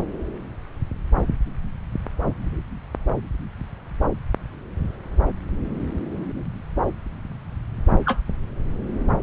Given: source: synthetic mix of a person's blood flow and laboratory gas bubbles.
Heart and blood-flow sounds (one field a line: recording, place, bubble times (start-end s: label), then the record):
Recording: Doppler ultrasound of blood flow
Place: subclavian vein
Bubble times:
8.05-8.21 s: bubbles
From the record:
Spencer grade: 1 (occasional bubble signal discernible with the cardiac motion signal, with majority of cardiac periods free of bubbles)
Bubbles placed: anywhere in the cardiac cycle